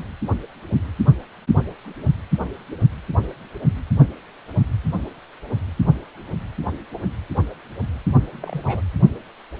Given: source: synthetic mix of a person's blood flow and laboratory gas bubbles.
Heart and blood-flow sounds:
Doppler ultrasound of blood flow; precordium
8.32-8.81 s: bubbles
From the record:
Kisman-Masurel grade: 111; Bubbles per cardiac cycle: 1 to 2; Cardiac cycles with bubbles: 1 to 10%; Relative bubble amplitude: barely perceptible (0.100 to 0.250); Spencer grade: 1 (occasional bubble signal discernible with the cardiac motion signal, with majority of cardiac periods free of bubbles); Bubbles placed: anywhere in the cardiac cycle

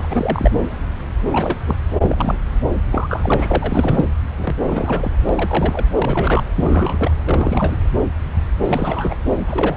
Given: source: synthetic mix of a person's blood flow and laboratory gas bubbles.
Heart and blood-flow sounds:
Doppler ultrasound of blood flow; subclavian vein
0.00-0.51 s: bubbles
1.30-1.58 s: bubbles
1.66-1.76 s: bubbles
2.01-2.40 s: bubbles
2.91-4.05 s: bubbles
4.38-4.56 s: bubbles
4.66-5.12 s: bubbles
5.29-5.84 s: bubbles
5.95-6.45 s: bubbles
6.54-7.11 s: bubbles
7.25-7.78 s: bubbles
8.62-9.14 s: bubbles
9.47-9.77 s: bubbles
From the record:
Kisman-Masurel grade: 332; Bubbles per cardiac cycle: rolling drumbeat, 9 or more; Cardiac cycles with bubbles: 50 to 99%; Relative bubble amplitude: moderate (0.250 to 0.450); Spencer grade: 3 (all of the cardiac periods contain showers or single bubble signals, but not dominating or overriding the cardiac motion signals); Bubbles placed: anywhere in the cardiac cycle

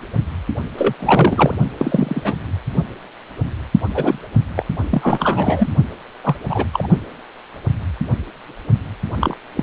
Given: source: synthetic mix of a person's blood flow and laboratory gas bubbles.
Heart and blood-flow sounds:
Doppler ultrasound of blood flow; precordium
0.77-0.94 s: bubbles
0.99-1.54 s: bubbles
1.79-2.35 s: bubbles
3.95-4.18 s: bubbles
4.56-4.65 s: bubbles
4.90-5.69 s: bubbles
6.23-6.35 s: bubbles
6.50-6.66 s: bubbles
6.72-6.88 s: bubbles
9.20-9.36 s: bubbles
9.57-9.63 s: bubbles
From the record:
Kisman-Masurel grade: 233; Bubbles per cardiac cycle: several, 3 to 8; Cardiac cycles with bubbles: 50 to 99%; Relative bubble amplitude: loud (0.450 to 0.775); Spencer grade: 3 (all of the cardiac periods contain showers or single bubble signals, but not dominating or overriding the cardiac motion signals); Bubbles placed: only in the low amplitude regions of the cardiac cycle

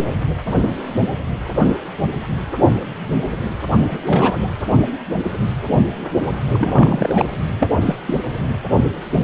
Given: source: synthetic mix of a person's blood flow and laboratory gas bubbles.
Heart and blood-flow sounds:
Doppler ultrasound of blood flow; precordium
3.88-3.99 s: bubbles
4.07-4.49 s: bubbles
6.54-7.25 s: bubbles
7.59-7.69 s: bubbles
7.80-7.96 s: bubbles
8.07-8.15 s: bubbles
From the record:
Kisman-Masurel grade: 222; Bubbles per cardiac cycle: several, 3 to 8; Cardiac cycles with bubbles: 10 to 50%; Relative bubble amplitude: moderate (0.250 to 0.450); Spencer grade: 2 (many but less than half of the cardiac periods contain bubble signals, singularly or in groups); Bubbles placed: anywhere in the cardiac cycle

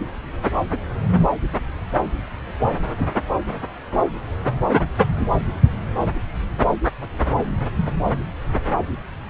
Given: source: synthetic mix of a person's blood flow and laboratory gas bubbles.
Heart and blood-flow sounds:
Doppler ultrasound of blood flow; subclavian vein
no bubbles
From the record:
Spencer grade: 0 (complete lack of bubble signals)

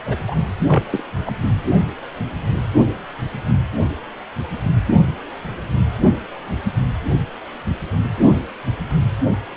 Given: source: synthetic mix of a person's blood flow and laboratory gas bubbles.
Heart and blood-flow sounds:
Doppler ultrasound of blood flow; precordium
0.05-0.16 s: bubbles
0.28-0.36 s: bubbles
0.59-0.82 s: bubbles
0.90-1.03 s: bubbles
1.25-1.33 s: bubbles
From the record:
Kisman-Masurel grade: 212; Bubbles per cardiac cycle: several, 3 to 8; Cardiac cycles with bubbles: 1 to 10%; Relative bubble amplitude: moderate (0.250 to 0.450); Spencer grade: 1 (occasional bubble signal discernible with the cardiac motion signal, with majority of cardiac periods free of bubbles); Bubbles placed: only in the low amplitude regions of the cardiac cycle

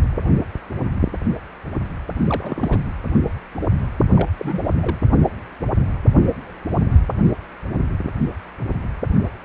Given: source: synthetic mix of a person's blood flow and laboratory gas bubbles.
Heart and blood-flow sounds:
Doppler ultrasound of blood flow; precordium
2.24-2.78 s: bubbles
4.16-4.29 s: bubbles
4.38-4.62 s: bubbles
4.81-4.98 s: bubbles
From the record:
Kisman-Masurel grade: 221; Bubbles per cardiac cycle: several, 3 to 8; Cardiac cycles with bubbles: 10 to 50%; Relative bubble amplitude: barely perceptible (0.100 to 0.250); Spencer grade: 2 (many but less than half of the cardiac periods contain bubble signals, singularly or in groups); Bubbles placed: anywhere in the cardiac cycle

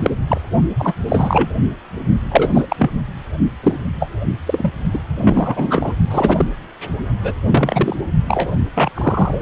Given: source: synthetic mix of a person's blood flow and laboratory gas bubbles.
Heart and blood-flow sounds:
Doppler ultrasound of blood flow; precordium
0.02-0.11 s: bubbles
0.28-0.41 s: bubbles
0.79-0.95 s: bubbles
1.08-1.49 s: bubbles
2.31-2.90 s: bubbles
3.63-3.77 s: bubbles
3.99-4.10 s: bubbles
4.46-4.71 s: bubbles
4.93-4.99 s: bubbles
5.16-5.93 s: bubbles
6.10-6.46 s: bubbles
7.23-7.33 s: bubbles
7.45-7.96 s: bubbles
8.27-8.52 s: bubbles
8.75-8.90 s: bubbles
8.94-9.41 s: bubbles
From the record:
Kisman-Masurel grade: 243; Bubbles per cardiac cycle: several, 3 to 8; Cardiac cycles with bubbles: 100%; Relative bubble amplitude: loud (0.450 to 0.775); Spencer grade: 3 (all of the cardiac periods contain showers or single bubble signals, but not dominating or overriding the cardiac motion signals); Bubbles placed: only in the low amplitude regions of the cardiac cycle

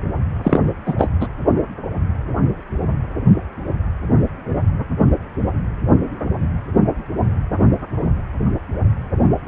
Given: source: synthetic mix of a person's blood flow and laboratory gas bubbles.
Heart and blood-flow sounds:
Doppler ultrasound of blood flow; precordium
0.44-0.59 s: bubbles
0.86-0.95 s: bubbles
0.97-1.07 s: bubbles
1.20-1.27 s: bubbles
From the record:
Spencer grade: 1 (occasional bubble signal discernible with the cardiac motion signal, with majority of cardiac periods free of bubbles); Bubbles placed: anywhere in the cardiac cycle

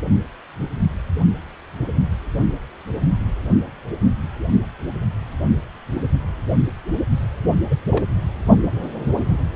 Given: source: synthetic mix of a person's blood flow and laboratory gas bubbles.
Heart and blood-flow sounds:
Doppler ultrasound of blood flow; precordium
7.71-7.74 s: bubbles
7.91-8.05 s: bubbles
From the record:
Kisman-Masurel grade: 121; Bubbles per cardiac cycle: 1 to 2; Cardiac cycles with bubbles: 10 to 50%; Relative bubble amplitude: barely perceptible (0.100 to 0.250); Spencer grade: 2 (many but less than half of the cardiac periods contain bubble signals, singularly or in groups); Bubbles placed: only in the low amplitude regions of the cardiac cycle

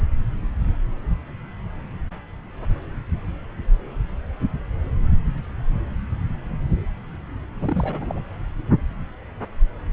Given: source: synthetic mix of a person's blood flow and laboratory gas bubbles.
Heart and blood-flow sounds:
Doppler ultrasound of blood flow; subclavian vein
7.59-8.24 s: bubbles
From the record:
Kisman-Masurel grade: 211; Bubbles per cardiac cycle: several, 3 to 8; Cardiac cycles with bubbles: 1 to 10%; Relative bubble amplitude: barely perceptible (0.100 to 0.250); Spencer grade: 1 (occasional bubble signal discernible with the cardiac motion signal, with majority of cardiac periods free of bubbles); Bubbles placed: anywhere in the cardiac cycle

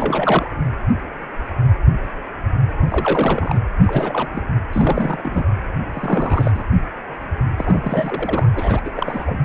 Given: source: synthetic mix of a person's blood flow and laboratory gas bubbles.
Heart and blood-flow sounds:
Doppler ultrasound of blood flow; precordium
0.00-0.48 s: bubbles
2.81-3.60 s: bubbles
3.82-4.29 s: bubbles
4.33-4.42 s: bubbles
4.73-5.45 s: bubbles
5.94-6.63 s: bubbles
7.57-8.50 s: bubbles
8.55-8.80 s: bubbles
8.85-8.90 s: bubbles
8.96-9.39 s: bubbles
From the record:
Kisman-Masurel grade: 332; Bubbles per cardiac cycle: rolling drumbeat, 9 or more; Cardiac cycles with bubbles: 50 to 99%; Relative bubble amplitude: moderate (0.250 to 0.450); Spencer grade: 3 (all of the cardiac periods contain showers or single bubble signals, but not dominating or overriding the cardiac motion signals); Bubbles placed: anywhere in the cardiac cycle

